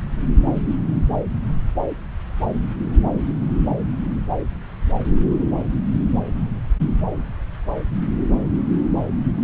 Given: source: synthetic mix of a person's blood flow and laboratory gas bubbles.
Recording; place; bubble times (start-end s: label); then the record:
Doppler ultrasound of blood flow; subclavian vein
no bubbles
From the record:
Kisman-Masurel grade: 000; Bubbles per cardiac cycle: 0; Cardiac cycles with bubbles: 0%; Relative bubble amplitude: no bubbles discernible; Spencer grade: 0 (complete lack of bubble signals)